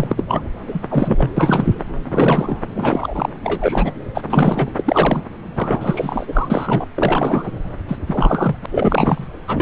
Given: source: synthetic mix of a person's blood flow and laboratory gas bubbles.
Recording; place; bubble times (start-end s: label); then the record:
Doppler ultrasound of blood flow; subclavian vein
0.00-0.26 s: bubbles
0.29-0.43 s: bubbles
0.68-0.80 s: bubbles
0.90-1.30 s: bubbles
1.36-1.74 s: bubbles
2.06-2.57 s: bubbles
2.75-3.29 s: bubbles
3.44-3.91 s: bubbles
4.14-4.23 s: bubbles
4.30-4.70 s: bubbles
4.77-5.21 s: bubbles
5.54-6.85 s: bubbles
6.95-7.51 s: bubbles
7.88-7.97 s: bubbles
8.06-8.59 s: bubbles
8.62-8.66 s: bubbles
8.71-9.25 s: bubbles
9.47-9.62 s: bubbles
From the record:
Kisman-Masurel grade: 343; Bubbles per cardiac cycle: rolling drumbeat, 9 or more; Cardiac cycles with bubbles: 100%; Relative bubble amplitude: loud (0.450 to 0.775); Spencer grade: 3 (all of the cardiac periods contain showers or single bubble signals, but not dominating or overriding the cardiac motion signals); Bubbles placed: anywhere in the cardiac cycle